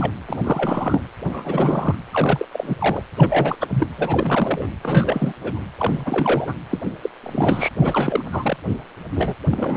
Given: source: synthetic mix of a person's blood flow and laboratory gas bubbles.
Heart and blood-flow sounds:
Doppler ultrasound of blood flow; precordium
0.00-0.12 s: bubbles
0.28-1.01 s: bubbles
1.24-1.95 s: bubbles
2.12-2.46 s: bubbles
2.52-2.75 s: bubbles
2.79-3.02 s: bubbles
3.17-3.56 s: bubbles
3.60-3.88 s: bubbles
3.97-4.68 s: bubbles
4.83-5.34 s: bubbles
5.41-5.62 s: bubbles
5.78-6.54 s: bubbles
6.70-6.79 s: bubbles
7.01-7.09 s: bubbles
7.22-7.68 s: bubbles
7.81-8.57 s: bubbles
9.15-9.34 s: bubbles
9.51-9.76 s: bubbles
From the record:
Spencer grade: 3 (all of the cardiac periods contain showers or single bubble signals, but not dominating or overriding the cardiac motion signals); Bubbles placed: anywhere in the cardiac cycle

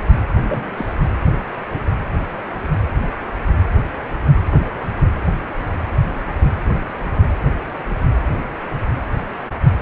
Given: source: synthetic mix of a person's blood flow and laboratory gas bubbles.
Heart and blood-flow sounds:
Doppler ultrasound of blood flow; precordium
0.46-0.93 s: bubbles
From the record:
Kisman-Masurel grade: 211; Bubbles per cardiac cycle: several, 3 to 8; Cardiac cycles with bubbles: 1 to 10%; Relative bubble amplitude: barely perceptible (0.100 to 0.250); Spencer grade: 1 (occasional bubble signal discernible with the cardiac motion signal, with majority of cardiac periods free of bubbles); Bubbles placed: anywhere in the cardiac cycle

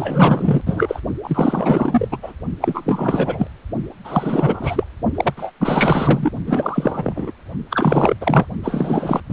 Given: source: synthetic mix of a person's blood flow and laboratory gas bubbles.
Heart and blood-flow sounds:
Doppler ultrasound of blood flow; precordium
0.00-0.61 s: bubbles
0.66-1.01 s: bubbles
1.23-2.08 s: bubbles
2.11-2.17 s: bubbles
2.22-2.32 s: bubbles
2.61-3.47 s: bubbles
4.04-4.83 s: bubbles
5.15-5.33 s: bubbles
5.37-5.52 s: bubbles
5.60-6.31 s: bubbles
6.47-7.31 s: bubbles
7.70-8.14 s: bubbles
8.21-8.46 s: bubbles
8.63-9.20 s: bubbles
9.29-9.33 s: bubbles
From the record:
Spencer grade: 4 (maximum detectable bubble signal sounding continuously throughout systole and diastole of every cardiac period, and overriding the amplitude of the normal cardiac signals); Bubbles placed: only in the low amplitude regions of the cardiac cycle

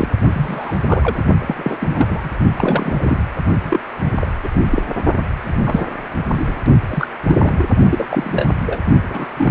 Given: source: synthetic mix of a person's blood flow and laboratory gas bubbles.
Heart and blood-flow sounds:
Doppler ultrasound of blood flow; precordium
0.00-0.07 s: bubbles
0.33-0.77 s: bubbles
0.87-1.24 s: bubbles
1.41-1.78 s: bubbles
1.80-2.29 s: bubbles
2.55-3.23 s: bubbles
3.62-3.80 s: bubbles
4.04-4.11 s: bubbles
4.20-4.27 s: bubbles
4.43-4.49 s: bubbles
4.52-4.62 s: bubbles
4.69-4.83 s: bubbles
5.42-5.87 s: bubbles
6.35-6.53 s: bubbles
6.89-7.07 s: bubbles
7.28-7.38 s: bubbles
7.42-7.54 s: bubbles
7.57-7.67 s: bubbles
7.89-8.06 s: bubbles
8.10-8.46 s: bubbles
8.66-8.82 s: bubbles
9.07-9.28 s: bubbles
9.37-9.50 s: bubbles
From the record:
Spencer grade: 3 (all of the cardiac periods contain showers or single bubble signals, but not dominating or overriding the cardiac motion signals); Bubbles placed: only in the low amplitude regions of the cardiac cycle

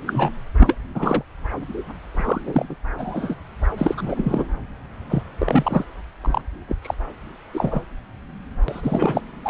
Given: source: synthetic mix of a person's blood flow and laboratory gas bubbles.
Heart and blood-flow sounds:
Doppler ultrasound of blood flow; subclavian vein
0.07-0.30 s: bubbles
0.58-0.77 s: bubbles
0.95-1.23 s: bubbles
2.11-2.66 s: bubbles
2.70-2.75 s: bubbles
2.97-3.35 s: bubbles
3.78-4.46 s: bubbles
5.09-5.23 s: bubbles
5.38-5.85 s: bubbles
6.21-6.42 s: bubbles
6.68-6.76 s: bubbles
6.82-6.95 s: bubbles
7.54-7.80 s: bubbles
8.68-9.21 s: bubbles
9.43-9.50 s: bubbles
From the record:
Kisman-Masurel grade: 232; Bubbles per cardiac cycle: several, 3 to 8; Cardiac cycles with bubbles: 50 to 99%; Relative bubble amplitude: moderate (0.250 to 0.450); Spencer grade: 3 (all of the cardiac periods contain showers or single bubble signals, but not dominating or overriding the cardiac motion signals); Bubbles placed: anywhere in the cardiac cycle

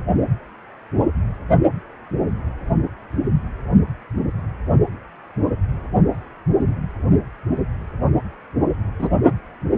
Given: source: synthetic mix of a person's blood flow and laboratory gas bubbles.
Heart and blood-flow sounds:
Doppler ultrasound of blood flow; precordium
8.99-9.10 s: bubbles
From the record:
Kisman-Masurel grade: 113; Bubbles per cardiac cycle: 1 to 2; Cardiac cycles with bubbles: 1 to 10%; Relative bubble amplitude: loud (0.450 to 0.775); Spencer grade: 1 (occasional bubble signal discernible with the cardiac motion signal, with majority of cardiac periods free of bubbles); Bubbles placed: only in the low amplitude regions of the cardiac cycle

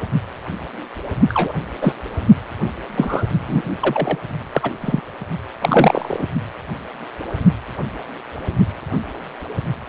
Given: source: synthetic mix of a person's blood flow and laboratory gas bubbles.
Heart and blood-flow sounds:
Doppler ultrasound of blood flow; precordium
1.28-1.52 s: bubbles
1.81-1.94 s: bubbles
2.97-3.24 s: bubbles
3.47-3.62 s: bubbles
3.80-4.18 s: bubbles
4.52-4.71 s: bubbles
4.81-5.01 s: bubbles
5.60-6.27 s: bubbles
From the record:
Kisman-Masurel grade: 233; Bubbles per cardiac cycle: several, 3 to 8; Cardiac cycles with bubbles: 50 to 99%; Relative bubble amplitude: loud (0.450 to 0.775); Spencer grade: 3 (all of the cardiac periods contain showers or single bubble signals, but not dominating or overriding the cardiac motion signals); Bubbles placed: only in the low amplitude regions of the cardiac cycle

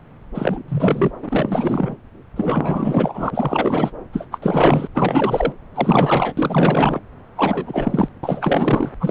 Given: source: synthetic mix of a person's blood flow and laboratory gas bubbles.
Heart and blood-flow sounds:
Doppler ultrasound of blood flow; subclavian vein
0.34-0.62 s: bubbles
0.68-1.11 s: bubbles
1.22-1.96 s: bubbles
2.35-3.92 s: bubbles
4.12-4.27 s: bubbles
4.31-4.38 s: bubbles
4.42-4.88 s: bubbles
4.94-5.52 s: bubbles
5.74-6.33 s: bubbles
6.37-6.99 s: bubbles
7.36-8.09 s: bubbles
8.23-8.92 s: bubbles
9.00-9.10 s: bubbles
From the record:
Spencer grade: 4 (maximum detectable bubble signal sounding continuously throughout systole and diastole of every cardiac period, and overriding the amplitude of the normal cardiac signals); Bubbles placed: anywhere in the cardiac cycle

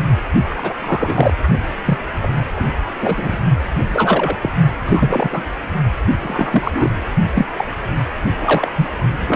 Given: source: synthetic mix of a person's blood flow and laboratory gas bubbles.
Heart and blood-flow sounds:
Doppler ultrasound of blood flow; precordium
0.49-0.74 s: bubbles
0.80-1.33 s: bubbles
1.85-1.98 s: bubbles
2.23-2.28 s: bubbles
2.56-2.65 s: bubbles
3.01-3.38 s: bubbles
3.93-4.36 s: bubbles
4.42-4.50 s: bubbles
4.85-5.42 s: bubbles
6.20-6.94 s: bubbles
7.35-7.47 s: bubbles
7.58-7.65 s: bubbles
8.37-8.72 s: bubbles
8.76-8.90 s: bubbles
9.17-9.36 s: bubbles
From the record:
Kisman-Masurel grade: 233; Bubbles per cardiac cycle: several, 3 to 8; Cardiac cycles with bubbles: 50 to 99%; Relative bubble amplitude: loud (0.450 to 0.775); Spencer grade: 3 (all of the cardiac periods contain showers or single bubble signals, but not dominating or overriding the cardiac motion signals); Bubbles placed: only in the low amplitude regions of the cardiac cycle

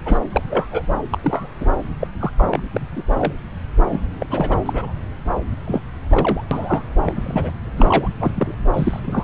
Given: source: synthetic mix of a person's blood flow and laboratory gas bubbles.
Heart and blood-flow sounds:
Doppler ultrasound of blood flow; subclavian vein
0.05-0.19 s: bubbles
0.32-0.43 s: bubbles
0.49-0.82 s: bubbles
1.11-1.19 s: bubbles
1.23-1.47 s: bubbles
1.60-1.66 s: bubbles
2.00-2.08 s: bubbles
2.20-2.32 s: bubbles
2.38-2.61 s: bubbles
2.74-2.80 s: bubbles
2.96-3.03 s: bubbles
3.18-3.33 s: bubbles
3.91-4.00 s: bubbles
4.19-4.27 s: bubbles
4.30-4.58 s: bubbles
4.66-4.92 s: bubbles
5.67-5.82 s: bubbles
6.10-6.44 s: bubbles
6.51-6.83 s: bubbles
7.04-7.54 s: bubbles
7.77-8.13 s: bubbles
8.21-8.32 s: bubbles
8.34-8.54 s: bubbles
8.73-9.00 s: bubbles
9.04-9.23 s: bubbles
From the record:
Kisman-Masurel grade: 242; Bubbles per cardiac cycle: several, 3 to 8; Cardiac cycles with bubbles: 100%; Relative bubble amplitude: moderate (0.250 to 0.450); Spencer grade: 3 (all of the cardiac periods contain showers or single bubble signals, but not dominating or overriding the cardiac motion signals); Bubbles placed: anywhere in the cardiac cycle

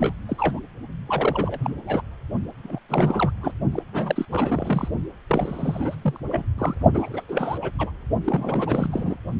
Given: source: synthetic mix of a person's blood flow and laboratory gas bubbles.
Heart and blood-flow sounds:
Doppler ultrasound of blood flow; precordium
0.00-0.13 s: bubbles
0.28-0.59 s: bubbles
1.06-1.75 s: bubbles
1.87-2.02 s: bubbles
2.62-2.79 s: bubbles
2.89-3.31 s: bubbles
3.40-3.52 s: bubbles
3.72-3.83 s: bubbles
3.92-4.26 s: bubbles
4.30-4.88 s: bubbles
5.29-5.95 s: bubbles
6.01-6.20 s: bubbles
6.30-6.45 s: bubbles
6.58-6.75 s: bubbles
6.94-7.24 s: bubbles
7.29-7.58 s: bubbles
7.62-7.71 s: bubbles
7.79-7.91 s: bubbles
8.24-9.17 s: bubbles
From the record:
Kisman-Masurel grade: 342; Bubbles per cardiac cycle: rolling drumbeat, 9 or more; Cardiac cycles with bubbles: 100%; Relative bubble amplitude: moderate (0.250 to 0.450); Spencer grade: 3 (all of the cardiac periods contain showers or single bubble signals, but not dominating or overriding the cardiac motion signals); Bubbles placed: only in the low amplitude regions of the cardiac cycle

